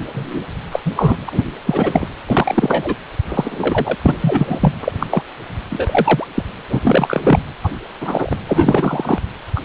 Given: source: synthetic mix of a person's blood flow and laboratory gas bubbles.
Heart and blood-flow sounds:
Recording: Doppler ultrasound of blood flow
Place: precordium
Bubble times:
0.14-0.43 s: bubbles
0.71-0.80 s: bubbles
0.85-0.92 s: bubbles
0.95-1.17 s: bubbles
1.27-1.29 s: bubbles
1.32-1.44 s: bubbles
1.66-2.08 s: bubbles
2.26-2.96 s: bubbles
3.28-3.96 s: bubbles
4.03-4.17 s: bubbles
4.20-4.72 s: bubbles
4.81-4.92 s: bubbles
4.99-5.06 s: bubbles
5.11-5.22 s: bubbles
5.70-6.25 s: bubbles
6.34-6.42 s: bubbles
6.70-7.21 s: bubbles
7.24-7.39 s: bubbles
7.63-7.71 s: bubbles
8.01-8.37 s: bubbles
8.47-9.19 s: bubbles
9.56-9.61 s: bubbles
From the record:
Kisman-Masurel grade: 243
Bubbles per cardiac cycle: several, 3 to 8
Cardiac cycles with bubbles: 100%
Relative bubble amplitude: loud (0.450 to 0.775)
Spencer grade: 3 (all of the cardiac periods contain showers or single bubble signals, but not dominating or overriding the cardiac motion signals)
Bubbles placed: anywhere in the cardiac cycle

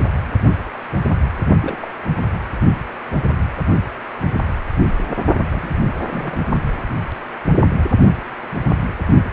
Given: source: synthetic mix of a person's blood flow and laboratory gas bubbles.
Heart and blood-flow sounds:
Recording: Doppler ultrasound of blood flow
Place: precordium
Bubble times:
1.62-1.91 s: bubbles
2.22-2.39 s: bubbles
5.49-5.71 s: bubbles
6.02-6.38 s: bubbles
From the record:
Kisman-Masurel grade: 221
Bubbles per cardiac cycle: several, 3 to 8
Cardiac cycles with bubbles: 10 to 50%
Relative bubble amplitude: barely perceptible (0.100 to 0.250)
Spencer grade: 2 (many but less than half of the cardiac periods contain bubble signals, singularly or in groups)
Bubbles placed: only in the low amplitude regions of the cardiac cycle

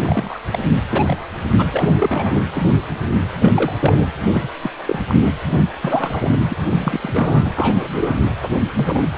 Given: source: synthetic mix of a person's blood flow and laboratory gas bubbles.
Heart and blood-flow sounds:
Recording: Doppler ultrasound of blood flow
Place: precordium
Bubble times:
0.03-0.40 s: bubbles
0.52-0.59 s: bubbles
0.93-1.17 s: bubbles
1.58-1.68 s: bubbles
1.71-1.96 s: bubbles
1.98-2.44 s: bubbles
2.51-2.79 s: bubbles
3.34-3.50 s: bubbles
3.54-3.72 s: bubbles
3.79-4.05 s: bubbles
4.33-4.48 s: bubbles
4.62-4.71 s: bubbles
4.85-4.99 s: bubbles
5.08-5.14 s: bubbles
5.22-5.32 s: bubbles
5.50-5.63 s: bubbles
5.81-6.39 s: bubbles
6.50-6.56 s: bubbles
6.67-7.50 s: bubbles
7.54-8.20 s: bubbles
8.76-9.03 s: bubbles
From the record:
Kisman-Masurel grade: 242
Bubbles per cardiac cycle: several, 3 to 8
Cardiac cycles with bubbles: 100%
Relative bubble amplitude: moderate (0.250 to 0.450)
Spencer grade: 3 (all of the cardiac periods contain showers or single bubble signals, but not dominating or overriding the cardiac motion signals)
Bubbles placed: anywhere in the cardiac cycle

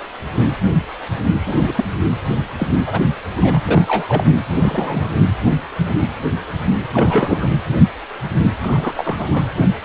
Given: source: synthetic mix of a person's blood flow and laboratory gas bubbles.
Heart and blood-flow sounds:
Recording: Doppler ultrasound of blood flow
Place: precordium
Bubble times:
1.46-1.55 s: bubbles
1.67-1.73 s: bubbles
1.76-1.85 s: bubbles
2.58-2.72 s: bubbles
2.79-3.00 s: bubbles
3.36-3.60 s: bubbles
3.65-4.31 s: bubbles
4.53-5.20 s: bubbles
6.93-7.48 s: bubbles
8.62-9.48 s: bubbles
From the record:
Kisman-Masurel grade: 232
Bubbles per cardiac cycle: several, 3 to 8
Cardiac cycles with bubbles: 50 to 99%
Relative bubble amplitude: moderate (0.250 to 0.450)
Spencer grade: 3 (all of the cardiac periods contain showers or single bubble signals, but not dominating or overriding the cardiac motion signals)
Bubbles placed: anywhere in the cardiac cycle

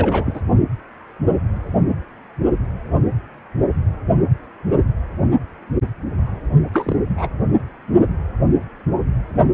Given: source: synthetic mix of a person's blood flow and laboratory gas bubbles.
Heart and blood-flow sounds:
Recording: Doppler ultrasound of blood flow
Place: precordium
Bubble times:
0.00-0.41 s: bubbles
6.73-6.96 s: bubbles
7.17-7.29 s: bubbles
From the record:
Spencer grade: 2 (many but less than half of the cardiac periods contain bubble signals, singularly or in groups)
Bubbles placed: only in the low amplitude regions of the cardiac cycle

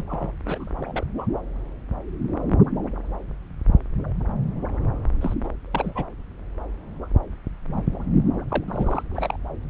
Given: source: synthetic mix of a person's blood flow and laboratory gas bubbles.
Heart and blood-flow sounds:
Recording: Doppler ultrasound of blood flow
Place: subclavian vein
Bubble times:
0.00-0.03 s: bubbles
0.09-0.31 s: bubbles
0.46-0.72 s: bubbles
0.81-1.05 s: bubbles
1.18-1.26 s: bubbles
5.21-5.34 s: bubbles
5.43-5.48 s: bubbles
5.71-6.05 s: bubbles
8.48-8.64 s: bubbles
8.67-9.03 s: bubbles
9.13-9.37 s: bubbles
From the record:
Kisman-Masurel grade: 221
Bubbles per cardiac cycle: several, 3 to 8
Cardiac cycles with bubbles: 10 to 50%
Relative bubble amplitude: barely perceptible (0.100 to 0.250)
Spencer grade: 2 (many but less than half of the cardiac periods contain bubble signals, singularly or in groups)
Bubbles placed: anywhere in the cardiac cycle

